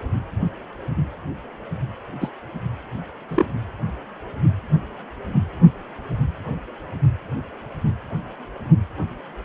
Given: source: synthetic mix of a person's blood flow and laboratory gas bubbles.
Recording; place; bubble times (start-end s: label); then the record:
Doppler ultrasound of blood flow; precordium
2.21-2.29 s: bubbles
3.29-3.46 s: bubbles
From the record:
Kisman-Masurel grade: 122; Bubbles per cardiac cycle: 1 to 2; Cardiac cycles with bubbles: 10 to 50%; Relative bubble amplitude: moderate (0.250 to 0.450); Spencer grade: 2 (many but less than half of the cardiac periods contain bubble signals, singularly or in groups); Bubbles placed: anywhere in the cardiac cycle